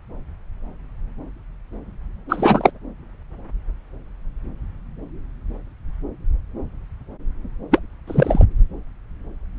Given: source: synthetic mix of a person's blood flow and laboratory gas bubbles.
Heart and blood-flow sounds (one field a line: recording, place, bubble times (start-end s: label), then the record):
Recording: Doppler ultrasound of blood flow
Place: subclavian vein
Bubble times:
2.29-2.71 s: bubbles
7.71-7.79 s: bubbles
8.07-8.45 s: bubbles
From the record:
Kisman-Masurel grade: 223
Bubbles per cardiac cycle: several, 3 to 8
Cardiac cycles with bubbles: 10 to 50%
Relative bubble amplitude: loud (0.450 to 0.775)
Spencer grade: 2 (many but less than half of the cardiac periods contain bubble signals, singularly or in groups)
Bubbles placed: anywhere in the cardiac cycle